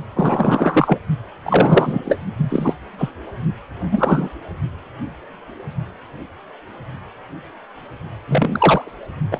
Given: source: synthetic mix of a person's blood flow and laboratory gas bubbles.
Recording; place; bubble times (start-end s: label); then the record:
Doppler ultrasound of blood flow; precordium
0.16-0.98 s: bubbles
1.45-2.01 s: bubbles
2.05-2.17 s: bubbles
2.38-2.74 s: bubbles
2.98-3.10 s: bubbles
3.92-4.29 s: bubbles
8.28-8.91 s: bubbles
9.31-9.39 s: bubbles
From the record:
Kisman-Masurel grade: 233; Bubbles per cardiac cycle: several, 3 to 8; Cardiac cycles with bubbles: 50 to 99%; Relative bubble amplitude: loud (0.450 to 0.775); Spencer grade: 3 (all of the cardiac periods contain showers or single bubble signals, but not dominating or overriding the cardiac motion signals); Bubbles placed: only in the low amplitude regions of the cardiac cycle